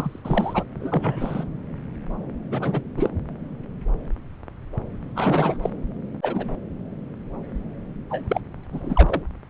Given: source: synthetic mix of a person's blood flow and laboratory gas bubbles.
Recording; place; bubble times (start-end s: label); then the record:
Doppler ultrasound of blood flow; subclavian vein
0.00-0.22 s: bubbles
0.24-0.64 s: bubbles
0.80-1.45 s: bubbles
2.52-2.81 s: bubbles
2.97-3.10 s: bubbles
5.16-5.57 s: bubbles
5.62-5.70 s: bubbles
6.22-6.45 s: bubbles
8.10-8.40 s: bubbles
8.72-9.22 s: bubbles
From the record:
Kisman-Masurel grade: 232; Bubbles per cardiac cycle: several, 3 to 8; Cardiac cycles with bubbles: 50 to 99%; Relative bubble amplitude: moderate (0.250 to 0.450); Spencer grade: 3 (all of the cardiac periods contain showers or single bubble signals, but not dominating or overriding the cardiac motion signals); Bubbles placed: anywhere in the cardiac cycle